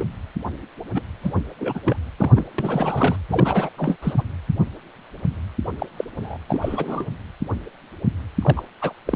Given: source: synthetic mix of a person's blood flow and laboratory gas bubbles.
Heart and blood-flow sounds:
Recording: Doppler ultrasound of blood flow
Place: precordium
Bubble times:
0.00-0.04 s: bubbles
0.94-1.02 s: bubbles
1.21-1.44 s: bubbles
1.58-1.81 s: bubbles
1.83-1.96 s: bubbles
2.18-2.44 s: bubbles
2.58-3.16 s: bubbles
3.29-3.69 s: bubbles
3.77-3.97 s: bubbles
4.02-4.14 s: bubbles
4.18-4.24 s: bubbles
5.79-5.86 s: bubbles
5.97-6.04 s: bubbles
6.20-6.37 s: bubbles
6.48-7.05 s: bubbles
8.42-8.62 s: bubbles
8.81-8.93 s: bubbles
9.06-9.16 s: bubbles
From the record:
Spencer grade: 3 (all of the cardiac periods contain showers or single bubble signals, but not dominating or overriding the cardiac motion signals)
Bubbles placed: anywhere in the cardiac cycle

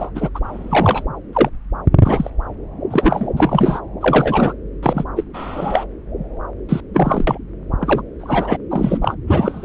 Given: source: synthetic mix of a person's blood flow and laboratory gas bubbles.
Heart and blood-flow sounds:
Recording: Doppler ultrasound of blood flow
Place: subclavian vein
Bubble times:
0.00-0.11 s: bubbles
0.14-0.29 s: bubbles
0.34-0.40 s: bubbles
0.43-1.03 s: bubbles
1.32-1.49 s: bubbles
2.04-2.31 s: bubbles
2.90-3.30 s: bubbles
3.36-3.80 s: bubbles
4.01-4.54 s: bubbles
4.82-5.04 s: bubbles
5.15-5.23 s: bubbles
5.33-5.85 s: bubbles
6.69-6.80 s: bubbles
6.94-7.38 s: bubbles
7.80-8.02 s: bubbles
8.19-8.57 s: bubbles
8.71-8.98 s: bubbles
9.02-9.15 s: bubbles
9.27-9.65 s: bubbles
From the record:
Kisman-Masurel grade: 243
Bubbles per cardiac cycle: several, 3 to 8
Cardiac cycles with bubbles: 100%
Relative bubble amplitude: loud (0.450 to 0.775)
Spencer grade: 3 (all of the cardiac periods contain showers or single bubble signals, but not dominating or overriding the cardiac motion signals)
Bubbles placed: anywhere in the cardiac cycle

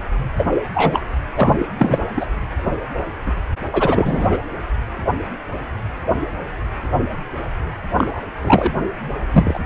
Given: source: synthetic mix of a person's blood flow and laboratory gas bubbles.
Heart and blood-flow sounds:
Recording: Doppler ultrasound of blood flow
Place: precordium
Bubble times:
0.37-0.48 s: bubbles
0.74-1.02 s: bubbles
1.36-1.64 s: bubbles
1.79-1.98 s: bubbles
2.16-2.27 s: bubbles
3.26-3.33 s: bubbles
3.72-4.37 s: bubbles
7.98-8.21 s: bubbles
8.41-8.72 s: bubbles
9.32-9.59 s: bubbles
From the record:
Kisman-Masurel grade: 233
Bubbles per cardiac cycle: several, 3 to 8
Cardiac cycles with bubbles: 50 to 99%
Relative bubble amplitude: loud (0.450 to 0.775)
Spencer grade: 3 (all of the cardiac periods contain showers or single bubble signals, but not dominating or overriding the cardiac motion signals)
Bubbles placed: anywhere in the cardiac cycle

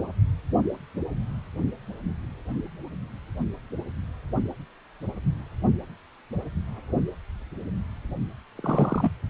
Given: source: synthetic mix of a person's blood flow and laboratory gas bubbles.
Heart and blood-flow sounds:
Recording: Doppler ultrasound of blood flow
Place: precordium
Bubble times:
8.57-9.11 s: bubbles
From the record:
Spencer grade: 1 (occasional bubble signal discernible with the cardiac motion signal, with majority of cardiac periods free of bubbles)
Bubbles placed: only in the low amplitude regions of the cardiac cycle

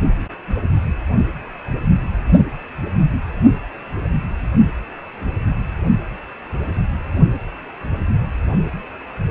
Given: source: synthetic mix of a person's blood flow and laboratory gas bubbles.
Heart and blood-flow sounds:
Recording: Doppler ultrasound of blood flow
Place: precordium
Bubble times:
2.98-3.11 s: bubbles
From the record:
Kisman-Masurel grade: 111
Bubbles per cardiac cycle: 1 to 2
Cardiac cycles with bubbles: 1 to 10%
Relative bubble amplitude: barely perceptible (0.100 to 0.250)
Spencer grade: 1 (occasional bubble signal discernible with the cardiac motion signal, with majority of cardiac periods free of bubbles)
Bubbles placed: only in the low amplitude regions of the cardiac cycle

